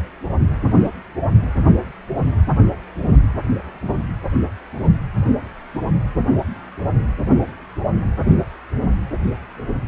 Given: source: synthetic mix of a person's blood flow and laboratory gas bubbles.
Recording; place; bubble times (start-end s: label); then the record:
Doppler ultrasound of blood flow; precordium
no bubbles
From the record:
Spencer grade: 0 (complete lack of bubble signals)